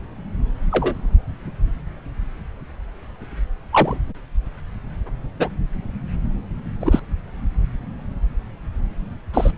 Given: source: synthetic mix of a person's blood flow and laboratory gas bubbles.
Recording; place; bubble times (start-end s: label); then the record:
Doppler ultrasound of blood flow; subclavian vein
0.71-0.95 s: bubbles
3.73-3.96 s: bubbles
5.39-5.49 s: bubbles
6.81-7.01 s: bubbles
9.34-9.51 s: bubbles
From the record:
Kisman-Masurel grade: 123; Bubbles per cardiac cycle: 1 to 2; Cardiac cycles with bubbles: 10 to 50%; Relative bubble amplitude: loud (0.450 to 0.775); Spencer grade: 2 (many but less than half of the cardiac periods contain bubble signals, singularly or in groups); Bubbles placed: anywhere in the cardiac cycle